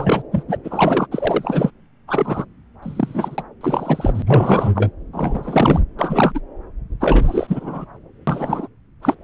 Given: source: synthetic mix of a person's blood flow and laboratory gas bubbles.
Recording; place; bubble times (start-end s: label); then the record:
Doppler ultrasound of blood flow; subclavian vein
0.00-0.22 s: bubbles
0.32-0.43 s: bubbles
0.48-0.57 s: bubbles
0.64-1.06 s: bubbles
1.11-1.70 s: bubbles
2.08-2.45 s: bubbles
2.82-3.43 s: bubbles
3.60-4.22 s: bubbles
4.26-4.72 s: bubbles
4.75-4.90 s: bubbles
5.12-5.80 s: bubbles
5.98-6.41 s: bubbles
7.00-7.85 s: bubbles
8.27-8.68 s: bubbles
9.02-9.15 s: bubbles
From the record:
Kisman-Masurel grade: 343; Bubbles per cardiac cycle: rolling drumbeat, 9 or more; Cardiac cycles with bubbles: 100%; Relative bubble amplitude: loud (0.450 to 0.775); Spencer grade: 3 (all of the cardiac periods contain showers or single bubble signals, but not dominating or overriding the cardiac motion signals); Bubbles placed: anywhere in the cardiac cycle